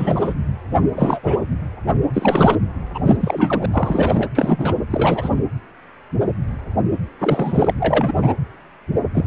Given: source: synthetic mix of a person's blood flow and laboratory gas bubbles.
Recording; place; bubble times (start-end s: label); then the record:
Doppler ultrasound of blood flow; precordium
0.00-0.34 s: bubbles
0.96-1.20 s: bubbles
1.23-1.43 s: bubbles
2.13-2.55 s: bubbles
2.94-2.99 s: bubbles
3.05-3.17 s: bubbles
3.20-3.66 s: bubbles
3.71-4.29 s: bubbles
4.34-4.75 s: bubbles
4.90-5.29 s: bubbles
7.19-7.74 s: bubbles
7.79-8.34 s: bubbles
9.14-9.27 s: bubbles
From the record:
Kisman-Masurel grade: 333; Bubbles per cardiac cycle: rolling drumbeat, 9 or more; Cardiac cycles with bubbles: 50 to 99%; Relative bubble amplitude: loud (0.450 to 0.775); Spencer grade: 3 (all of the cardiac periods contain showers or single bubble signals, but not dominating or overriding the cardiac motion signals); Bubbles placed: anywhere in the cardiac cycle